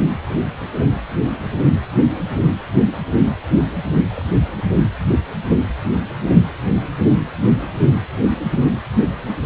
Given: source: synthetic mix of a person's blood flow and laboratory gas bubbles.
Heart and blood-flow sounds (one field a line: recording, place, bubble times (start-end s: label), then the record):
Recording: Doppler ultrasound of blood flow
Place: precordium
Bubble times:
4.16-4.24 s: bubbles
4.42-4.71 s: bubbles
From the record:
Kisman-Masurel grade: 211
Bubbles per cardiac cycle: several, 3 to 8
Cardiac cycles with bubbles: 1 to 10%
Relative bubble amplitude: barely perceptible (0.100 to 0.250)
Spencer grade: 1 (occasional bubble signal discernible with the cardiac motion signal, with majority of cardiac periods free of bubbles)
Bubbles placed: anywhere in the cardiac cycle